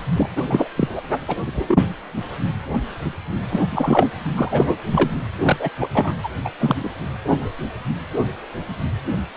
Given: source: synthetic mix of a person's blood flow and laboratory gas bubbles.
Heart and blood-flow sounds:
Doppler ultrasound of blood flow; precordium
0.16-0.29 s: bubbles
0.36-0.69 s: bubbles
0.76-0.89 s: bubbles
0.96-1.03 s: bubbles
1.28-1.36 s: bubbles
1.46-1.64 s: bubbles
1.67-1.88 s: bubbles
3.50-3.61 s: bubbles
3.69-4.08 s: bubbles
4.37-4.78 s: bubbles
4.93-5.10 s: bubbles
5.40-5.57 s: bubbles
5.59-5.70 s: bubbles
5.80-5.88 s: bubbles
5.94-6.13 s: bubbles
6.24-6.29 s: bubbles
6.45-6.50 s: bubbles
6.59-6.90 s: bubbles
From the record:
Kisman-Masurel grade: 233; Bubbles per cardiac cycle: several, 3 to 8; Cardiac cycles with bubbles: 50 to 99%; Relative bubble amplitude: loud (0.450 to 0.775); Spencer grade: 3 (all of the cardiac periods contain showers or single bubble signals, but not dominating or overriding the cardiac motion signals); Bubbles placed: anywhere in the cardiac cycle

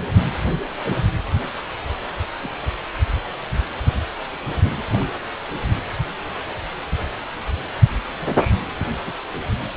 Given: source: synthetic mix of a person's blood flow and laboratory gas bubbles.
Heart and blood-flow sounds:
Doppler ultrasound of blood flow; precordium
2.42-2.49 s: bubbles
4.93-5.17 s: bubbles
8.20-8.58 s: bubbles
9.05-9.18 s: bubbles
From the record:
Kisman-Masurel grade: 121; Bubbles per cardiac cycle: 1 to 2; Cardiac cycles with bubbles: 10 to 50%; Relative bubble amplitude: barely perceptible (0.100 to 0.250); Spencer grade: 2 (many but less than half of the cardiac periods contain bubble signals, singularly or in groups); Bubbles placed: anywhere in the cardiac cycle

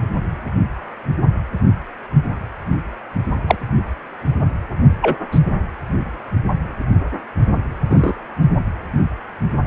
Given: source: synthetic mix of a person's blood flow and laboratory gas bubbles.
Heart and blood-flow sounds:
Doppler ultrasound of blood flow; precordium
3.47-3.55 s: bubbles
5.01-5.16 s: bubbles
5.31-5.39 s: bubbles
7.90-8.12 s: bubbles
From the record:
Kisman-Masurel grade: 123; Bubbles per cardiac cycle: 1 to 2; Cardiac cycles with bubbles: 10 to 50%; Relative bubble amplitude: loud (0.450 to 0.775); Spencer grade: 2 (many but less than half of the cardiac periods contain bubble signals, singularly or in groups); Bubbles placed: only in the low amplitude regions of the cardiac cycle

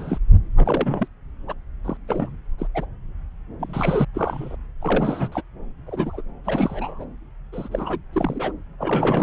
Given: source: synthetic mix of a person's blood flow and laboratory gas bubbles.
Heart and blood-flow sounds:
Doppler ultrasound of blood flow; subclavian vein
0.00-0.18 s: bubbles
0.56-1.07 s: bubbles
1.47-1.54 s: bubbles
1.84-1.97 s: bubbles
2.07-2.36 s: bubbles
2.58-2.67 s: bubbles
2.74-2.85 s: bubbles
3.58-4.05 s: bubbles
4.14-4.55 s: bubbles
4.81-5.42 s: bubbles
5.87-6.22 s: bubbles
6.44-7.05 s: bubbles
7.52-7.68 s: bubbles
7.71-7.99 s: bubbles
8.12-8.52 s: bubbles
8.79-9.22 s: bubbles
From the record:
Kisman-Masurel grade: 242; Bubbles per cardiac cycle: several, 3 to 8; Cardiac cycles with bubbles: 100%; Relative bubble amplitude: moderate (0.250 to 0.450); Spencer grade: 3 (all of the cardiac periods contain showers or single bubble signals, but not dominating or overriding the cardiac motion signals); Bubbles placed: anywhere in the cardiac cycle

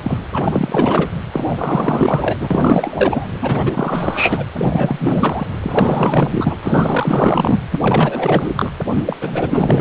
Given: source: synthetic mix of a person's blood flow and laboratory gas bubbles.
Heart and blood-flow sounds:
Doppler ultrasound of blood flow; precordium
0.03-0.19 s: bubbles
0.32-1.10 s: bubbles
1.33-2.38 s: bubbles
2.40-3.25 s: bubbles
3.41-4.45 s: bubbles
4.53-5.47 s: bubbles
5.62-6.56 s: bubbles
6.62-7.59 s: bubbles
7.72-8.72 s: bubbles
8.97-9.03 s: bubbles
9.06-9.17 s: bubbles
9.21-9.81 s: bubbles
From the record:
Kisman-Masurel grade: 444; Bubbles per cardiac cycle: continuous sound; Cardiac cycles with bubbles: 100%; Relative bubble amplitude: maximal (0.775 to 0.999); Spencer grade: 4 (maximum detectable bubble signal sounding continuously throughout systole and diastole of every cardiac period, and overriding the amplitude of the normal cardiac signals); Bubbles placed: anywhere in the cardiac cycle

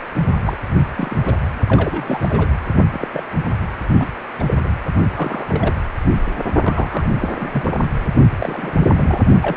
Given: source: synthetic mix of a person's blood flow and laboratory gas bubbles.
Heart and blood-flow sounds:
Doppler ultrasound of blood flow; precordium
0.45-0.58 s: bubbles
0.97-1.17 s: bubbles
1.25-1.34 s: bubbles
1.68-2.50 s: bubbles
2.92-3.08 s: bubbles
3.13-3.23 s: bubbles
3.99-4.07 s: bubbles
4.39-4.44 s: bubbles
4.48-4.54 s: bubbles
4.64-4.69 s: bubbles
5.14-5.75 s: bubbles
6.62-7.08 s: bubbles
7.20-7.29 s: bubbles
7.32-7.78 s: bubbles
8.29-9.21 s: bubbles
9.42-9.57 s: bubbles
From the record:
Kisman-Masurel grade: 242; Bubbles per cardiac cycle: several, 3 to 8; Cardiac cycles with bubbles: 100%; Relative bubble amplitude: moderate (0.250 to 0.450); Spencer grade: 3 (all of the cardiac periods contain showers or single bubble signals, but not dominating or overriding the cardiac motion signals); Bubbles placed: only in the low amplitude regions of the cardiac cycle

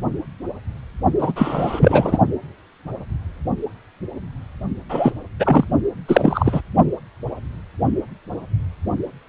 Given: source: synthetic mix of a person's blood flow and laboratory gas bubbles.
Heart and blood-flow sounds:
Doppler ultrasound of blood flow; precordium
1.18-1.32 s: bubbles
1.35-2.18 s: bubbles
4.89-5.12 s: bubbles
5.40-5.65 s: bubbles
6.08-6.62 s: bubbles
From the record:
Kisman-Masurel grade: 233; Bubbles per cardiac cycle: several, 3 to 8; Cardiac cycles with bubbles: 50 to 99%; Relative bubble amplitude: loud (0.450 to 0.775); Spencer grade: 3 (all of the cardiac periods contain showers or single bubble signals, but not dominating or overriding the cardiac motion signals); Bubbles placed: only in the low amplitude regions of the cardiac cycle

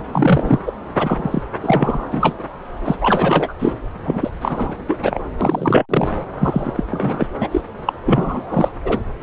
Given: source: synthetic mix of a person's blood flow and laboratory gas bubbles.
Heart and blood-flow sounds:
Doppler ultrasound of blood flow; subclavian vein
0.00-0.03 s: bubbles
0.12-0.59 s: bubbles
0.66-0.73 s: bubbles
0.99-1.43 s: bubbles
1.62-2.06 s: bubbles
2.11-2.35 s: bubbles
2.85-2.96 s: bubbles
3.00-3.54 s: bubbles
3.59-3.73 s: bubbles
4.05-4.30 s: bubbles
4.41-4.77 s: bubbles
4.87-4.96 s: bubbles
5.03-5.19 s: bubbles
5.41-5.86 s: bubbles
5.89-6.08 s: bubbles
6.40-6.72 s: bubbles
6.76-6.83 s: bubbles
6.89-7.27 s: bubbles
7.40-7.48 s: bubbles
7.51-7.61 s: bubbles
7.86-7.93 s: bubbles
8.05-8.71 s: bubbles
8.85-9.01 s: bubbles
From the record:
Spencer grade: 3 (all of the cardiac periods contain showers or single bubble signals, but not dominating or overriding the cardiac motion signals); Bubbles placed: anywhere in the cardiac cycle

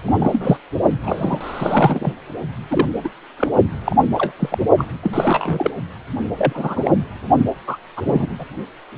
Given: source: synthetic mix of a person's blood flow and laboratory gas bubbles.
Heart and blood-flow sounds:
Doppler ultrasound of blood flow; precordium
0.05-0.57 s: bubbles
1.04-2.12 s: bubbles
2.70-2.88 s: bubbles
3.03-3.08 s: bubbles
3.37-3.48 s: bubbles
3.85-3.96 s: bubbles
4.13-4.33 s: bubbles
4.39-4.58 s: bubbles
4.77-4.85 s: bubbles
5.03-5.71 s: bubbles
6.38-6.91 s: bubbles
7.67-7.77 s: bubbles
7.96-8.02 s: bubbles
8.06-8.28 s: bubbles
8.39-8.45 s: bubbles
From the record:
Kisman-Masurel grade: 242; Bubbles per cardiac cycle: several, 3 to 8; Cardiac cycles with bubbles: 100%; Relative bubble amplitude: moderate (0.250 to 0.450); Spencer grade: 3 (all of the cardiac periods contain showers or single bubble signals, but not dominating or overriding the cardiac motion signals); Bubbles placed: only in the low amplitude regions of the cardiac cycle

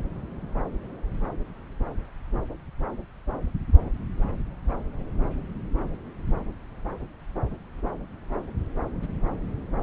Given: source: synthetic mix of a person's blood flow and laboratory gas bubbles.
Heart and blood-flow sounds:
Doppler ultrasound of blood flow; subclavian vein
no bubbles
From the record:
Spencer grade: 0 (complete lack of bubble signals)

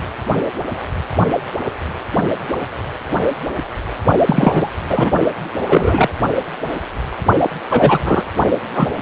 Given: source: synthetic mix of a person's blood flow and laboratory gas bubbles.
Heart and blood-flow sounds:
Doppler ultrasound of blood flow; precordium
4.25-4.70 s: bubbles
4.90-5.10 s: bubbles
5.68-6.09 s: bubbles
7.42-7.50 s: bubbles
7.69-7.99 s: bubbles
8.04-8.22 s: bubbles
8.74-8.88 s: bubbles
From the record:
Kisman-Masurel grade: 233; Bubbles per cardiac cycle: several, 3 to 8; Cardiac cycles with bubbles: 50 to 99%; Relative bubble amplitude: loud (0.450 to 0.775); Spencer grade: 3 (all of the cardiac periods contain showers or single bubble signals, but not dominating or overriding the cardiac motion signals); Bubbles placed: only in the low amplitude regions of the cardiac cycle

